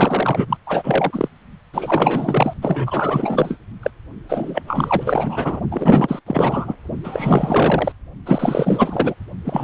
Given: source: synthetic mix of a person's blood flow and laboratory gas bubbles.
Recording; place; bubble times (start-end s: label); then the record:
Doppler ultrasound of blood flow; precordium
0.00-0.56 s: bubbles
0.66-1.28 s: bubbles
1.73-2.54 s: bubbles
2.62-3.58 s: bubbles
3.83-3.91 s: bubbles
4.29-4.62 s: bubbles
4.67-5.60 s: bubbles
5.71-6.20 s: bubbles
6.26-6.74 s: bubbles
7.04-7.92 s: bubbles
8.25-9.14 s: bubbles
9.44-9.64 s: bubbles
From the record:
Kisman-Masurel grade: 444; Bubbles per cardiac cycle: continuous sound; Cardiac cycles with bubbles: 100%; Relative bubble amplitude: maximal (0.775 to 0.999); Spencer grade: 4 (maximum detectable bubble signal sounding continuously throughout systole and diastole of every cardiac period, and overriding the amplitude of the normal cardiac signals); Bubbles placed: only in the low amplitude regions of the cardiac cycle